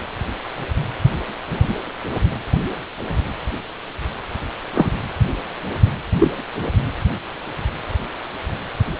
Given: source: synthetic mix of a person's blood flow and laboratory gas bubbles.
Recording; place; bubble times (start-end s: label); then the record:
Doppler ultrasound of blood flow; precordium
4.75-4.91 s: bubbles
6.18-6.31 s: bubbles
From the record:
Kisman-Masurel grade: 123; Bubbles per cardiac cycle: 1 to 2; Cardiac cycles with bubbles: 10 to 50%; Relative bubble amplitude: loud (0.450 to 0.775); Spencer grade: 2 (many but less than half of the cardiac periods contain bubble signals, singularly or in groups); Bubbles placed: anywhere in the cardiac cycle